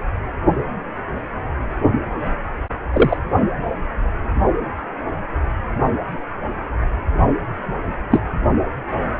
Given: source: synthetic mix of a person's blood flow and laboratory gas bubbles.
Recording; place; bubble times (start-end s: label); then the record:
Doppler ultrasound of blood flow; precordium
2.92-3.17 s: bubbles
8.11-8.20 s: bubbles
From the record:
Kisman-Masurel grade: 123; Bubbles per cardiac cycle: 1 to 2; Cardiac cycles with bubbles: 10 to 50%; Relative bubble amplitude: loud (0.450 to 0.775); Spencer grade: 2 (many but less than half of the cardiac periods contain bubble signals, singularly or in groups); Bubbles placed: only in the low amplitude regions of the cardiac cycle